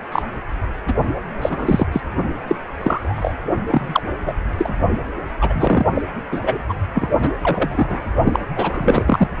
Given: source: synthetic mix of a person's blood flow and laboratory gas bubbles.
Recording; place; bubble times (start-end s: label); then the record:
Doppler ultrasound of blood flow; precordium
0.11-0.23 s: bubbles
0.87-0.93 s: bubbles
1.42-1.86 s: bubbles
1.92-2.01 s: bubbles
2.48-2.55 s: bubbles
2.77-3.34 s: bubbles
3.70-4.03 s: bubbles
4.25-4.34 s: bubbles
4.58-4.75 s: bubbles
5.41-5.84 s: bubbles
5.95-6.02 s: bubbles
6.31-6.41 s: bubbles
6.46-6.62 s: bubbles
6.68-6.75 s: bubbles
6.94-7.08 s: bubbles
7.21-7.29 s: bubbles
7.43-8.13 s: bubbles
8.23-8.39 s: bubbles
8.55-9.28 s: bubbles
From the record:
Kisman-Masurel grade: 243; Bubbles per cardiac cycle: several, 3 to 8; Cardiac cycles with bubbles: 100%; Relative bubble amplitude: loud (0.450 to 0.775); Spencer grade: 3 (all of the cardiac periods contain showers or single bubble signals, but not dominating or overriding the cardiac motion signals); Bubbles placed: only in the low amplitude regions of the cardiac cycle